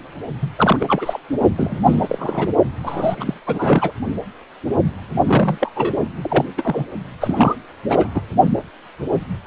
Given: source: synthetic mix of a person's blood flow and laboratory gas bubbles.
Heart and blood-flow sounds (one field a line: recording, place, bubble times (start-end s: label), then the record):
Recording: Doppler ultrasound of blood flow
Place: precordium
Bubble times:
0.41-0.48 s: bubbles
0.56-1.19 s: bubbles
1.56-2.48 s: bubbles
2.83-3.40 s: bubbles
3.46-3.93 s: bubbles
5.26-5.71 s: bubbles
5.75-5.95 s: bubbles
6.21-6.45 s: bubbles
6.58-6.87 s: bubbles
7.21-7.55 s: bubbles
7.88-8.10 s: bubbles
8.14-8.21 s: bubbles
From the record:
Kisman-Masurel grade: 332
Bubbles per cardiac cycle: rolling drumbeat, 9 or more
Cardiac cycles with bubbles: 50 to 99%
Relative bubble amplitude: moderate (0.250 to 0.450)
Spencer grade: 3 (all of the cardiac periods contain showers or single bubble signals, but not dominating or overriding the cardiac motion signals)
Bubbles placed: only in the low amplitude regions of the cardiac cycle